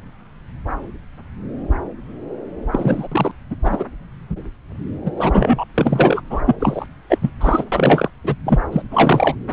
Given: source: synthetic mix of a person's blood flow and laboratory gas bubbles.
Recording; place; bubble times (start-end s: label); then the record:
Doppler ultrasound of blood flow; subclavian vein
2.73-3.07 s: bubbles
3.11-3.31 s: bubbles
3.50-3.55 s: bubbles
3.63-3.84 s: bubbles
5.05-5.11 s: bubbles
5.16-5.64 s: bubbles
5.74-6.21 s: bubbles
6.30-6.40 s: bubbles
6.46-6.55 s: bubbles
6.60-6.86 s: bubbles
7.09-7.18 s: bubbles
7.21-7.30 s: bubbles
7.41-7.64 s: bubbles
7.72-8.10 s: bubbles
8.23-8.35 s: bubbles
8.46-8.60 s: bubbles
8.72-8.82 s: bubbles
8.90-9.35 s: bubbles
From the record:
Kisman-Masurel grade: 333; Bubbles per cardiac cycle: rolling drumbeat, 9 or more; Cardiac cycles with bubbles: 50 to 99%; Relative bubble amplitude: loud (0.450 to 0.775); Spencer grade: 3 (all of the cardiac periods contain showers or single bubble signals, but not dominating or overriding the cardiac motion signals); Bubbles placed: anywhere in the cardiac cycle